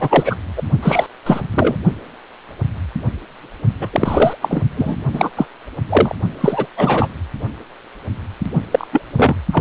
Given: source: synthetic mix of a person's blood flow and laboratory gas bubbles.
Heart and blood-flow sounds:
Doppler ultrasound of blood flow; precordium
0.00-0.36 s: bubbles
0.56-0.62 s: bubbles
0.82-1.06 s: bubbles
1.26-1.41 s: bubbles
1.54-1.77 s: bubbles
3.81-3.89 s: bubbles
3.92-4.64 s: bubbles
4.77-4.96 s: bubbles
5.12-5.30 s: bubbles
5.36-5.45 s: bubbles
5.89-6.15 s: bubbles
6.40-6.67 s: bubbles
6.77-7.10 s: bubbles
8.71-8.88 s: bubbles
8.92-9.02 s: bubbles
9.17-9.35 s: bubbles
9.53-9.61 s: bubbles
From the record:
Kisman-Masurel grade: 233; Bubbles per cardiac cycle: several, 3 to 8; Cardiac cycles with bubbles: 50 to 99%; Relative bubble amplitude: loud (0.450 to 0.775); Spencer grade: 3 (all of the cardiac periods contain showers or single bubble signals, but not dominating or overriding the cardiac motion signals); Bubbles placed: only in the low amplitude regions of the cardiac cycle

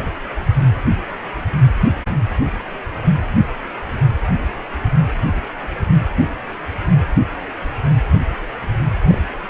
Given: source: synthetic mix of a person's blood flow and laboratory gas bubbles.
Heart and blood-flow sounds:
Doppler ultrasound of blood flow; precordium
9.07-9.19 s: bubbles
From the record:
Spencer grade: 1 (occasional bubble signal discernible with the cardiac motion signal, with majority of cardiac periods free of bubbles); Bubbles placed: anywhere in the cardiac cycle

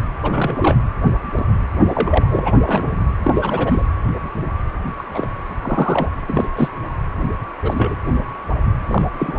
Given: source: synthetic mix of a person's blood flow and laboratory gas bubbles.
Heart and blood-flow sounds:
Doppler ultrasound of blood flow; precordium
0.23-0.76 s: bubbles
1.36-1.45 s: bubbles
1.88-2.54 s: bubbles
2.67-2.97 s: bubbles
3.23-3.85 s: bubbles
4.98-5.03 s: bubbles
5.13-5.29 s: bubbles
5.62-6.09 s: bubbles
6.27-6.48 s: bubbles
6.57-6.68 s: bubbles
7.64-7.95 s: bubbles
8.89-9.02 s: bubbles
9.18-9.37 s: bubbles
From the record:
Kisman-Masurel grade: 232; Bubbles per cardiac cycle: several, 3 to 8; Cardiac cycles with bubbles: 50 to 99%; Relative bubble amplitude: moderate (0.250 to 0.450); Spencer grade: 3 (all of the cardiac periods contain showers or single bubble signals, but not dominating or overriding the cardiac motion signals); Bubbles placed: anywhere in the cardiac cycle

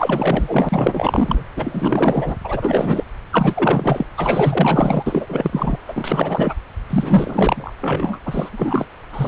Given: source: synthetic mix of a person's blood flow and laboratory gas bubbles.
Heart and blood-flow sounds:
Doppler ultrasound of blood flow; subclavian vein
0.00-1.44 s: bubbles
1.56-2.37 s: bubbles
2.44-3.04 s: bubbles
3.31-4.06 s: bubbles
4.17-5.78 s: bubbles
5.87-6.54 s: bubbles
6.89-7.73 s: bubbles
7.80-8.19 s: bubbles
8.25-8.49 s: bubbles
8.52-8.87 s: bubbles
9.13-9.28 s: bubbles
From the record:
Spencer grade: 4 (maximum detectable bubble signal sounding continuously throughout systole and diastole of every cardiac period, and overriding the amplitude of the normal cardiac signals); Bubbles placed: anywhere in the cardiac cycle

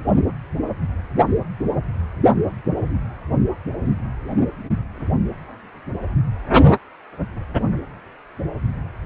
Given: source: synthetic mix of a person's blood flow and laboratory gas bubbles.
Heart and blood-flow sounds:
Doppler ultrasound of blood flow; precordium
no bubbles
From the record:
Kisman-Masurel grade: 000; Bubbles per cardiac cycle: 0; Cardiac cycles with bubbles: 0%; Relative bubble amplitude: no bubbles discernible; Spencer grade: 0 (complete lack of bubble signals)

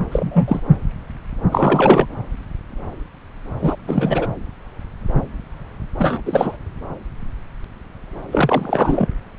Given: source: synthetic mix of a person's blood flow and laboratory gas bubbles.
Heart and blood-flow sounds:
Doppler ultrasound of blood flow; subclavian vein
0.11-0.60 s: bubbles
1.50-2.06 s: bubbles
3.60-3.76 s: bubbles
3.87-4.27 s: bubbles
5.99-6.21 s: bubbles
6.25-6.57 s: bubbles
8.31-9.07 s: bubbles
From the record:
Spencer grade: 2 (many but less than half of the cardiac periods contain bubble signals, singularly or in groups); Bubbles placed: anywhere in the cardiac cycle

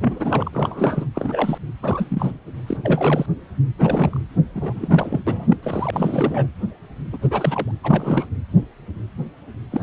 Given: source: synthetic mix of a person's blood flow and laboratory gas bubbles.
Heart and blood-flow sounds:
Doppler ultrasound of blood flow; precordium
0.00-0.50 s: bubbles
0.53-1.06 s: bubbles
1.15-1.58 s: bubbles
1.82-2.39 s: bubbles
2.67-2.77 s: bubbles
2.83-3.26 s: bubbles
3.78-4.21 s: bubbles
4.55-5.20 s: bubbles
5.27-5.57 s: bubbles
5.62-6.46 s: bubbles
7.12-7.17 s: bubbles
7.21-7.71 s: bubbles
7.83-8.26 s: bubbles
9.71-9.83 s: bubbles
From the record:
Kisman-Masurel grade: 332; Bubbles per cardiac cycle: rolling drumbeat, 9 or more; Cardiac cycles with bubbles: 50 to 99%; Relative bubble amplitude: moderate (0.250 to 0.450); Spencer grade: 3 (all of the cardiac periods contain showers or single bubble signals, but not dominating or overriding the cardiac motion signals); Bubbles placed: anywhere in the cardiac cycle

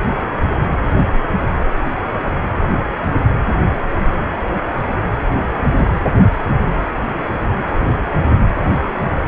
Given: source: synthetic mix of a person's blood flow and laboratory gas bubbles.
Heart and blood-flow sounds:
Doppler ultrasound of blood flow; precordium
no bubbles
From the record:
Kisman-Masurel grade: 000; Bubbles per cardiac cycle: 0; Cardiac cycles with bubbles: 0%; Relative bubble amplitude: no bubbles discernible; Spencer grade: 0 (complete lack of bubble signals)

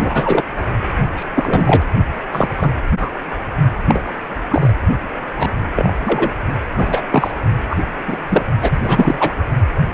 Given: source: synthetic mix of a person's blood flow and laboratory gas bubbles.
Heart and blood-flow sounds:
Doppler ultrasound of blood flow; precordium
0.00-0.43 s: bubbles
1.16-1.30 s: bubbles
1.34-1.82 s: bubbles
2.31-2.48 s: bubbles
2.58-2.69 s: bubbles
2.99-3.10 s: bubbles
3.88-4.17 s: bubbles
4.50-4.72 s: bubbles
5.37-5.51 s: bubbles
5.76-5.92 s: bubbles
6.05-6.30 s: bubbles
6.76-7.01 s: bubbles
7.11-7.31 s: bubbles
7.70-7.76 s: bubbles
8.08-8.17 s: bubbles
8.30-8.43 s: bubbles
8.61-8.80 s: bubbles
8.83-9.35 s: bubbles
From the record:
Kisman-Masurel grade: 233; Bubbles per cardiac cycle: several, 3 to 8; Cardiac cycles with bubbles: 50 to 99%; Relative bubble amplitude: loud (0.450 to 0.775); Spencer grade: 3 (all of the cardiac periods contain showers or single bubble signals, but not dominating or overriding the cardiac motion signals); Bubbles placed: only in the low amplitude regions of the cardiac cycle

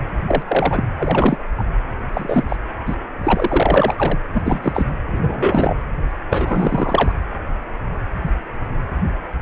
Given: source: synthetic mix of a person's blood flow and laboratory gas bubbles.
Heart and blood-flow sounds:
Doppler ultrasound of blood flow; precordium
0.27-0.43 s: bubbles
0.47-0.84 s: bubbles
0.96-1.38 s: bubbles
1.57-1.64 s: bubbles
2.13-2.44 s: bubbles
2.49-2.56 s: bubbles
2.86-2.97 s: bubbles
3.23-4.18 s: bubbles
4.33-4.87 s: bubbles
5.13-5.76 s: bubbles
6.30-7.11 s: bubbles
From the record:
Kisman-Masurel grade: 233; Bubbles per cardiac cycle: several, 3 to 8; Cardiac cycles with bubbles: 50 to 99%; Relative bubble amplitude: loud (0.450 to 0.775); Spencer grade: 3 (all of the cardiac periods contain showers or single bubble signals, but not dominating or overriding the cardiac motion signals); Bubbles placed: anywhere in the cardiac cycle

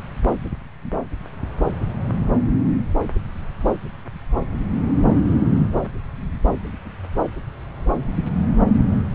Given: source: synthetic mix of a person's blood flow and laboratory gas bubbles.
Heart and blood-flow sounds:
Doppler ultrasound of blood flow; subclavian vein
no bubbles
From the record:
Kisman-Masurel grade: 000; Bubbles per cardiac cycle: 0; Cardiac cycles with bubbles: 0%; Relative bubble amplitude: no bubbles discernible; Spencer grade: 0 (complete lack of bubble signals)

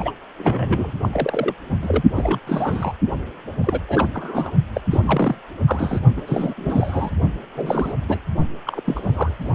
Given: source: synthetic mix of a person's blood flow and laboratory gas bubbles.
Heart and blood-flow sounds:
Doppler ultrasound of blood flow; precordium
0.00-0.12 s: bubbles
0.39-0.93 s: bubbles
1.02-1.09 s: bubbles
1.12-1.54 s: bubbles
1.81-2.02 s: bubbles
2.16-2.39 s: bubbles
2.47-2.93 s: bubbles
3.64-3.81 s: bubbles
3.88-4.10 s: bubbles
4.13-4.52 s: bubbles
4.73-4.81 s: bubbles
4.90-5.35 s: bubbles
5.67-5.99 s: bubbles
6.16-6.21 s: bubbles
6.26-6.54 s: bubbles
6.56-7.10 s: bubbles
7.55-7.94 s: bubbles
8.07-8.20 s: bubbles
8.66-8.80 s: bubbles
8.86-9.36 s: bubbles
9.39-9.54 s: bubbles
From the record:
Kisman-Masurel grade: 342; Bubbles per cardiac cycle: rolling drumbeat, 9 or more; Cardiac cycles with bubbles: 100%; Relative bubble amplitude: moderate (0.250 to 0.450); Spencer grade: 3 (all of the cardiac periods contain showers or single bubble signals, but not dominating or overriding the cardiac motion signals); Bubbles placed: only in the low amplitude regions of the cardiac cycle

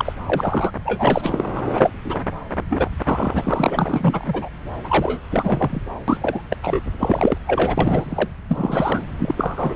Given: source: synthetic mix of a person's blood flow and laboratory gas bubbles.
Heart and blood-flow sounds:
Doppler ultrasound of blood flow; subclavian vein
0.00-0.12 s: bubbles
0.26-0.70 s: bubbles
0.85-1.44 s: bubbles
1.56-1.62 s: bubbles
1.65-1.91 s: bubbles
2.04-2.20 s: bubbles
2.70-2.89 s: bubbles
3.04-4.49 s: bubbles
4.84-5.20 s: bubbles
5.30-5.82 s: bubbles
6.08-6.42 s: bubbles
6.50-6.56 s: bubbles
6.63-6.80 s: bubbles
6.99-7.38 s: bubbles
7.46-8.28 s: bubbles
8.48-9.06 s: bubbles
9.18-9.34 s: bubbles
9.37-9.75 s: bubbles
From the record:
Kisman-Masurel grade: 342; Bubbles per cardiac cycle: rolling drumbeat, 9 or more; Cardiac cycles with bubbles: 100%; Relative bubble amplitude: moderate (0.250 to 0.450); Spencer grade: 3 (all of the cardiac periods contain showers or single bubble signals, but not dominating or overriding the cardiac motion signals); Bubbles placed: anywhere in the cardiac cycle

